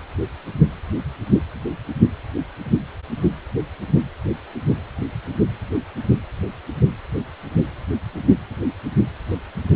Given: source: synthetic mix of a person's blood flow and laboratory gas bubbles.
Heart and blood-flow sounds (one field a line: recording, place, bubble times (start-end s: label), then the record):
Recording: Doppler ultrasound of blood flow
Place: precordium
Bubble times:
no bubbles
From the record:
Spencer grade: 0 (complete lack of bubble signals)